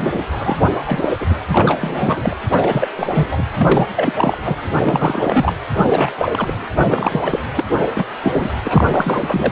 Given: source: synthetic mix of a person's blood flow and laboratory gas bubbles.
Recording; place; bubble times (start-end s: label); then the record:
Doppler ultrasound of blood flow; precordium
0.00-0.22 s: bubbles
0.32-0.62 s: bubbles
0.77-1.08 s: bubbles
1.21-1.26 s: bubbles
1.30-1.35 s: bubbles
1.51-2.37 s: bubbles
2.50-2.89 s: bubbles
2.96-3.44 s: bubbles
3.58-3.88 s: bubbles
3.96-4.13 s: bubbles
4.17-4.38 s: bubbles
4.44-4.56 s: bubbles
4.72-5.53 s: bubbles
5.77-6.11 s: bubbles
6.18-6.54 s: bubbles
6.84-7.39 s: bubbles
7.55-7.64 s: bubbles
7.96-8.04 s: bubbles
8.22-8.50 s: bubbles
8.64-8.88 s: bubbles
8.90-9.52 s: bubbles
From the record:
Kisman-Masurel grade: 343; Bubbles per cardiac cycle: rolling drumbeat, 9 or more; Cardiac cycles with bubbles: 100%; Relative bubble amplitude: loud (0.450 to 0.775); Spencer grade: 3 (all of the cardiac periods contain showers or single bubble signals, but not dominating or overriding the cardiac motion signals); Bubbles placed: anywhere in the cardiac cycle